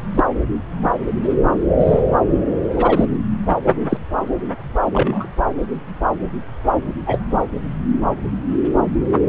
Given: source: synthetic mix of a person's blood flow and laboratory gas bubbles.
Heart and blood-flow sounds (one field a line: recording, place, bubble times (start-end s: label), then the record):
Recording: Doppler ultrasound of blood flow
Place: subclavian vein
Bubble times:
0.15-0.23 s: bubbles
1.79-2.01 s: bubbles
2.76-3.05 s: bubbles
3.89-3.97 s: bubbles
4.92-5.29 s: bubbles
7.06-7.20 s: bubbles
9.12-9.19 s: bubbles
From the record:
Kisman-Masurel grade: 123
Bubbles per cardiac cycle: 1 to 2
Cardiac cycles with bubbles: 10 to 50%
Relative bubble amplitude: loud (0.450 to 0.775)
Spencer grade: 2 (many but less than half of the cardiac periods contain bubble signals, singularly or in groups)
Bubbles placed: anywhere in the cardiac cycle